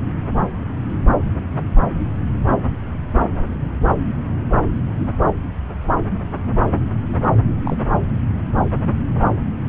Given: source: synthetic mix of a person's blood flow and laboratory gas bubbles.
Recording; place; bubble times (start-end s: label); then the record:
Doppler ultrasound of blood flow; subclavian vein
7.65-7.77 s: bubbles
From the record:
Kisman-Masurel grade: 112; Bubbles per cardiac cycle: 1 to 2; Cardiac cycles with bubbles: 1 to 10%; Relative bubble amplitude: moderate (0.250 to 0.450); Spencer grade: 1 (occasional bubble signal discernible with the cardiac motion signal, with majority of cardiac periods free of bubbles); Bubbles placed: anywhere in the cardiac cycle